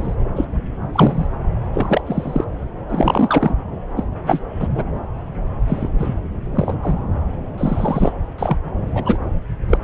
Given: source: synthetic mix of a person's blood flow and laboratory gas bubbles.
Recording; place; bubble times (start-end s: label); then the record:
Doppler ultrasound of blood flow; subclavian vein
0.00-0.15 s: bubbles
0.35-0.45 s: bubbles
0.93-1.27 s: bubbles
1.73-2.02 s: bubbles
2.06-2.44 s: bubbles
2.88-3.56 s: bubbles
3.96-4.04 s: bubbles
4.27-4.42 s: bubbles
4.59-4.68 s: bubbles
4.75-4.83 s: bubbles
5.67-5.89 s: bubbles
5.99-6.15 s: bubbles
6.55-6.75 s: bubbles
6.83-6.98 s: bubbles
7.58-8.12 s: bubbles
8.38-8.57 s: bubbles
8.94-9.17 s: bubbles
9.69-9.78 s: bubbles
9.82-9.84 s: bubbles
From the record:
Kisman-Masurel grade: 243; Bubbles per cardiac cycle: several, 3 to 8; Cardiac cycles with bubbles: 100%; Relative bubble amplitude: loud (0.450 to 0.775); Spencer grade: 3 (all of the cardiac periods contain showers or single bubble signals, but not dominating or overriding the cardiac motion signals); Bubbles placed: anywhere in the cardiac cycle